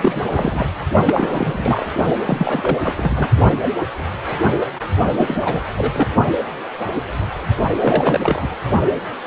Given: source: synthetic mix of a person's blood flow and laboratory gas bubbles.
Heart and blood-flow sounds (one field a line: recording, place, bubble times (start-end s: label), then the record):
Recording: Doppler ultrasound of blood flow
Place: precordium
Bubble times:
0.00-0.23 s: bubbles
0.26-0.67 s: bubbles
1.04-1.86 s: bubbles
2.25-2.77 s: bubbles
2.81-3.29 s: bubbles
5.18-5.61 s: bubbles
5.77-6.08 s: bubbles
7.81-8.55 s: bubbles
From the record:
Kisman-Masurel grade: 332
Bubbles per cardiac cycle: rolling drumbeat, 9 or more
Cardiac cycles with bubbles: 50 to 99%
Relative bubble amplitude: moderate (0.250 to 0.450)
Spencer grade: 3 (all of the cardiac periods contain showers or single bubble signals, but not dominating or overriding the cardiac motion signals)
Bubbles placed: only in the low amplitude regions of the cardiac cycle